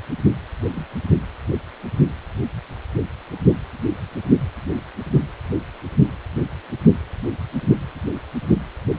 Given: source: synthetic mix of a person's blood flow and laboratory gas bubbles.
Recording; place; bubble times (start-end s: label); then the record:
Doppler ultrasound of blood flow; precordium
0.72-0.85 s: bubbles
From the record:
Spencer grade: 2 (many but less than half of the cardiac periods contain bubble signals, singularly or in groups); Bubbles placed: anywhere in the cardiac cycle